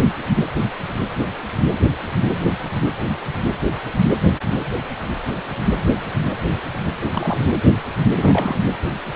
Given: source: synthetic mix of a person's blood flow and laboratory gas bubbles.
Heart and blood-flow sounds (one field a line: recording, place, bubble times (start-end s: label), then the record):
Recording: Doppler ultrasound of blood flow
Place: precordium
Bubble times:
7.12-7.46 s: bubbles
8.16-8.57 s: bubbles
From the record:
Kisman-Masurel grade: 222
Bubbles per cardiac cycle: several, 3 to 8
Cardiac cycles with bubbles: 10 to 50%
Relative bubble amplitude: moderate (0.250 to 0.450)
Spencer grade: 2 (many but less than half of the cardiac periods contain bubble signals, singularly or in groups)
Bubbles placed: anywhere in the cardiac cycle